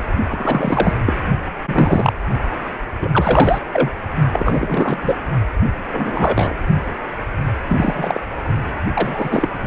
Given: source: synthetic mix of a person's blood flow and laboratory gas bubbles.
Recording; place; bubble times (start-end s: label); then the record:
Doppler ultrasound of blood flow; precordium
0.30-0.94 s: bubbles
1.06-1.14 s: bubbles
1.68-2.13 s: bubbles
3.01-3.09 s: bubbles
3.12-3.58 s: bubbles
3.73-3.90 s: bubbles
4.32-4.98 s: bubbles
5.03-5.16 s: bubbles
5.92-6.54 s: bubbles
7.68-8.21 s: bubbles
8.94-9.29 s: bubbles
9.31-9.48 s: bubbles
From the record:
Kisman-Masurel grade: 243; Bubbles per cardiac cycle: several, 3 to 8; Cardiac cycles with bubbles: 100%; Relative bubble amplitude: loud (0.450 to 0.775); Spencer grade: 3 (all of the cardiac periods contain showers or single bubble signals, but not dominating or overriding the cardiac motion signals); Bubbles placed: only in the low amplitude regions of the cardiac cycle